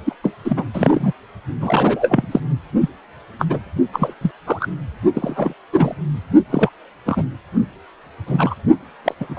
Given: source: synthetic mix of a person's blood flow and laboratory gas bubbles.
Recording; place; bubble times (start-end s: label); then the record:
Doppler ultrasound of blood flow; precordium
0.05-0.14 s: bubbles
0.23-0.32 s: bubbles
0.44-0.65 s: bubbles
0.73-1.12 s: bubbles
1.60-2.26 s: bubbles
2.31-2.40 s: bubbles
2.80-2.89 s: bubbles
3.38-3.46 s: bubbles
3.49-3.59 s: bubbles
3.93-4.13 s: bubbles
4.21-4.31 s: bubbles
4.46-4.67 s: bubbles
5.14-5.53 s: bubbles
5.72-5.95 s: bubbles
6.50-6.69 s: bubbles
7.05-7.23 s: bubbles
8.27-8.54 s: bubbles
9.04-9.14 s: bubbles
9.20-9.26 s: bubbles
9.29-9.39 s: bubbles
From the record:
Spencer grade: 3 (all of the cardiac periods contain showers or single bubble signals, but not dominating or overriding the cardiac motion signals); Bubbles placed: only in the low amplitude regions of the cardiac cycle